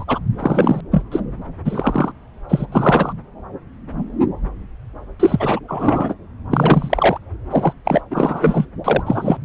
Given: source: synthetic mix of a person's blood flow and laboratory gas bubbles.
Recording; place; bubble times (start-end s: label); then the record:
Doppler ultrasound of blood flow; subclavian vein
0.00-0.04 s: bubbles
0.07-0.19 s: bubbles
0.39-0.81 s: bubbles
0.91-1.01 s: bubbles
1.11-1.20 s: bubbles
1.65-2.12 s: bubbles
2.48-2.65 s: bubbles
2.71-3.12 s: bubbles
5.20-5.60 s: bubbles
5.68-6.15 s: bubbles
6.51-7.18 s: bubbles
7.50-7.73 s: bubbles
7.85-8.01 s: bubbles
8.10-8.65 s: bubbles
8.84-9.37 s: bubbles
From the record:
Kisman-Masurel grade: 333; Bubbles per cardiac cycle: rolling drumbeat, 9 or more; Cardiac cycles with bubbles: 50 to 99%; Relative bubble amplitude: loud (0.450 to 0.775); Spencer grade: 3 (all of the cardiac periods contain showers or single bubble signals, but not dominating or overriding the cardiac motion signals); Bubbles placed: anywhere in the cardiac cycle